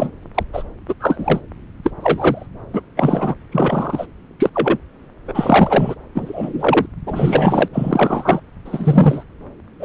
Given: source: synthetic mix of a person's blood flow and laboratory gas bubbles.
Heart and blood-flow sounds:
Doppler ultrasound of blood flow; subclavian vein
0.00-0.11 s: bubbles
0.35-0.43 s: bubbles
0.53-0.64 s: bubbles
0.88-0.94 s: bubbles
0.99-1.42 s: bubbles
1.83-1.90 s: bubbles
2.00-2.46 s: bubbles
2.73-2.81 s: bubbles
2.96-3.34 s: bubbles
3.51-4.06 s: bubbles
4.38-4.50 s: bubbles
4.54-4.78 s: bubbles
5.27-5.95 s: bubbles
6.15-6.87 s: bubbles
7.06-7.68 s: bubbles
7.73-8.40 s: bubbles
8.65-9.24 s: bubbles
9.79-9.85 s: bubbles
From the record:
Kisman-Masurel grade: 243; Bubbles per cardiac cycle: several, 3 to 8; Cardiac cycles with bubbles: 100%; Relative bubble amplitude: loud (0.450 to 0.775); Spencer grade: 3 (all of the cardiac periods contain showers or single bubble signals, but not dominating or overriding the cardiac motion signals); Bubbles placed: anywhere in the cardiac cycle

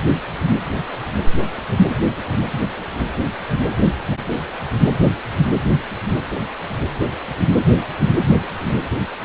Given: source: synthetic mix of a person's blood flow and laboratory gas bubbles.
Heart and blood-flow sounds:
Doppler ultrasound of blood flow; precordium
no bubbles
From the record:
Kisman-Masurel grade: 000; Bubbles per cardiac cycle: 0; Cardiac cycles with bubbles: 0%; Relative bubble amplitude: no bubbles discernible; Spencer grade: 0 (complete lack of bubble signals)

